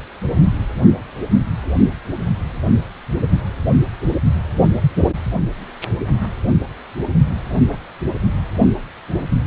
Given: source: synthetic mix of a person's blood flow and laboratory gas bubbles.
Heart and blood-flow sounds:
Doppler ultrasound of blood flow; precordium
7.68-7.78 s: bubbles
From the record:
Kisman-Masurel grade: 111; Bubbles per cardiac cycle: 1 to 2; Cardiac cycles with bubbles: 1 to 10%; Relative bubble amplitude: barely perceptible (0.100 to 0.250); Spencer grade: 1 (occasional bubble signal discernible with the cardiac motion signal, with majority of cardiac periods free of bubbles); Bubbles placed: only in the low amplitude regions of the cardiac cycle

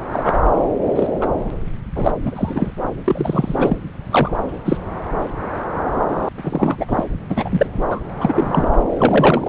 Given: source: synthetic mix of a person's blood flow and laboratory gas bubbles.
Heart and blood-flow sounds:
Doppler ultrasound of blood flow; subclavian vein
0.13-0.39 s: bubbles
0.42-0.46 s: bubbles
0.95-1.07 s: bubbles
1.20-1.28 s: bubbles
1.96-2.11 s: bubbles
2.21-2.73 s: bubbles
3.04-3.92 s: bubbles
4.11-4.31 s: bubbles
4.65-4.79 s: bubbles
6.37-7.04 s: bubbles
7.29-7.67 s: bubbles
7.73-8.03 s: bubbles
8.19-8.71 s: bubbles
8.97-9.49 s: bubbles
From the record:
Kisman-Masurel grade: 233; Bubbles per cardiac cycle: several, 3 to 8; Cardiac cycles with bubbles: 50 to 99%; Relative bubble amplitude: loud (0.450 to 0.775); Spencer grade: 3 (all of the cardiac periods contain showers or single bubble signals, but not dominating or overriding the cardiac motion signals); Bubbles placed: anywhere in the cardiac cycle

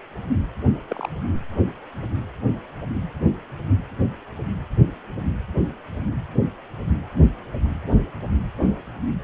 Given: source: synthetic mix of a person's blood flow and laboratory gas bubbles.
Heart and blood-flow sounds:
Doppler ultrasound of blood flow; precordium
0.88-1.09 s: bubbles
From the record:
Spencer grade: 2 (many but less than half of the cardiac periods contain bubble signals, singularly or in groups); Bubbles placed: anywhere in the cardiac cycle

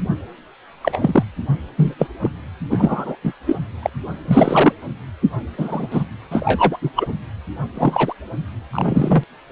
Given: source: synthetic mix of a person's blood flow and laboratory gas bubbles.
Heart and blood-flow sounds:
Doppler ultrasound of blood flow; precordium
0.81-1.23 s: bubbles
1.77-1.94 s: bubbles
1.98-2.08 s: bubbles
2.21-2.30 s: bubbles
2.70-3.15 s: bubbles
3.23-3.32 s: bubbles
3.46-3.56 s: bubbles
3.82-3.90 s: bubbles
4.28-4.73 s: bubbles
5.58-5.88 s: bubbles
5.91-6.04 s: bubbles
6.31-6.77 s: bubbles
6.82-6.91 s: bubbles
6.95-7.08 s: bubbles
7.74-8.13 s: bubbles
8.73-9.23 s: bubbles
9.49-9.52 s: bubbles
From the record:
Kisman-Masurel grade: 243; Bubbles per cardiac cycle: several, 3 to 8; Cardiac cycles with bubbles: 100%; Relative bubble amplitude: loud (0.450 to 0.775); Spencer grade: 3 (all of the cardiac periods contain showers or single bubble signals, but not dominating or overriding the cardiac motion signals); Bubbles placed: anywhere in the cardiac cycle

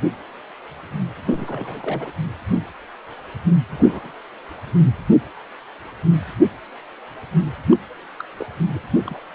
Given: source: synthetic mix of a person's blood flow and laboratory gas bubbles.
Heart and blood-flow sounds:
Doppler ultrasound of blood flow; precordium
1.25-2.10 s: bubbles
3.71-4.14 s: bubbles
7.71-7.77 s: bubbles
8.19-8.23 s: bubbles
8.40-8.45 s: bubbles
8.68-8.80 s: bubbles
9.05-9.18 s: bubbles
From the record:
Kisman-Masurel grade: 221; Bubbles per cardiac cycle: several, 3 to 8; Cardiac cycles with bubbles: 10 to 50%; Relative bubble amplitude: barely perceptible (0.100 to 0.250); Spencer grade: 2 (many but less than half of the cardiac periods contain bubble signals, singularly or in groups); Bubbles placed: anywhere in the cardiac cycle

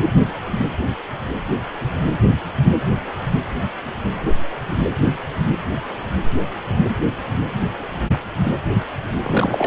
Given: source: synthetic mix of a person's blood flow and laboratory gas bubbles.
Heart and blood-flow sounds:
Doppler ultrasound of blood flow; precordium
9.22-9.67 s: bubbles
From the record:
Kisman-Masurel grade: 213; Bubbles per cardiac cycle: several, 3 to 8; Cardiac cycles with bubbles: 1 to 10%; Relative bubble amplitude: loud (0.450 to 0.775); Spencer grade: 1 (occasional bubble signal discernible with the cardiac motion signal, with majority of cardiac periods free of bubbles); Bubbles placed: anywhere in the cardiac cycle

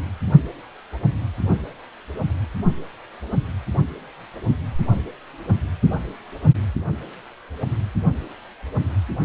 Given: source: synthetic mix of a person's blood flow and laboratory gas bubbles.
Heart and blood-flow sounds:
Doppler ultrasound of blood flow; precordium
no bubbles
From the record:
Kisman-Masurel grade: 000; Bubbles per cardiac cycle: 0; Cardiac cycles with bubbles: 0%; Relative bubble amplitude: no bubbles discernible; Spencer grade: 0 (complete lack of bubble signals)

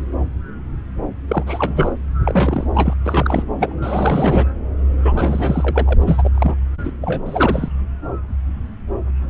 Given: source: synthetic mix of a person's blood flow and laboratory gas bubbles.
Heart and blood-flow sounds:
Doppler ultrasound of blood flow; subclavian vein
1.28-1.44 s: bubbles
1.46-1.94 s: bubbles
2.25-2.67 s: bubbles
2.75-2.94 s: bubbles
3.04-3.44 s: bubbles
3.60-3.73 s: bubbles
3.82-4.44 s: bubbles
5.04-6.29 s: bubbles
6.34-6.55 s: bubbles
6.84-6.92 s: bubbles
7.02-7.69 s: bubbles
From the record:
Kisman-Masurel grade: 332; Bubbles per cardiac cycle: rolling drumbeat, 9 or more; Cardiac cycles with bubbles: 50 to 99%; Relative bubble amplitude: moderate (0.250 to 0.450); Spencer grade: 3 (all of the cardiac periods contain showers or single bubble signals, but not dominating or overriding the cardiac motion signals); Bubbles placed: anywhere in the cardiac cycle

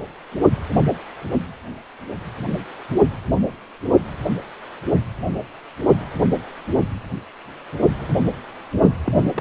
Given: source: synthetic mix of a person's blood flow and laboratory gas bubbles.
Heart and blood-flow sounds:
Doppler ultrasound of blood flow; precordium
9.05-9.31 s: bubbles
9.36-9.41 s: bubbles
From the record:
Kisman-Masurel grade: 211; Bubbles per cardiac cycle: several, 3 to 8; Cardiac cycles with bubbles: 1 to 10%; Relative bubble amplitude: barely perceptible (0.100 to 0.250); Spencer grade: 1 (occasional bubble signal discernible with the cardiac motion signal, with majority of cardiac periods free of bubbles); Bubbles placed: only in the low amplitude regions of the cardiac cycle

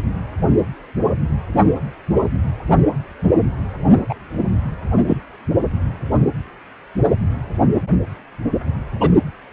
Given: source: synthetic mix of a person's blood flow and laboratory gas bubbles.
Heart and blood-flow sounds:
Doppler ultrasound of blood flow; precordium
4.09-4.15 s: bubbles
5.07-5.17 s: bubbles
9.00-9.09 s: bubbles
From the record:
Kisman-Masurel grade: 123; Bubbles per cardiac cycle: 1 to 2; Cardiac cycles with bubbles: 10 to 50%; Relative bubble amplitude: loud (0.450 to 0.775); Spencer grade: 2 (many but less than half of the cardiac periods contain bubble signals, singularly or in groups); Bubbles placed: only in the low amplitude regions of the cardiac cycle

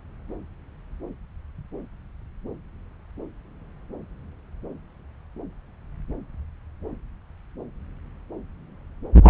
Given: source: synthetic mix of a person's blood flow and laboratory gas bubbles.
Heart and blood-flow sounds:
Doppler ultrasound of blood flow; subclavian vein
9.22-9.30 s: bubbles
From the record:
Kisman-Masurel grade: 213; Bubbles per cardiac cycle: several, 3 to 8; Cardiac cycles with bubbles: 1 to 10%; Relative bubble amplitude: loud (0.450 to 0.775); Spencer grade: 1 (occasional bubble signal discernible with the cardiac motion signal, with majority of cardiac periods free of bubbles); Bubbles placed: anywhere in the cardiac cycle

